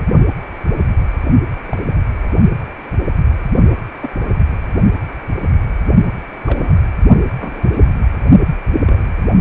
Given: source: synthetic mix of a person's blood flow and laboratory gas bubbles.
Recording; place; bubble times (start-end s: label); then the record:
Doppler ultrasound of blood flow; precordium
1.66-1.82 s: bubbles
4.02-4.11 s: bubbles
6.46-6.74 s: bubbles
7.38-7.87 s: bubbles
8.87-9.07 s: bubbles
From the record:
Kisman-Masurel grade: 121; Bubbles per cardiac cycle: 1 to 2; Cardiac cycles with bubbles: 10 to 50%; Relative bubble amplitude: barely perceptible (0.100 to 0.250); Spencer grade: 2 (many but less than half of the cardiac periods contain bubble signals, singularly or in groups); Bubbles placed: only in the low amplitude regions of the cardiac cycle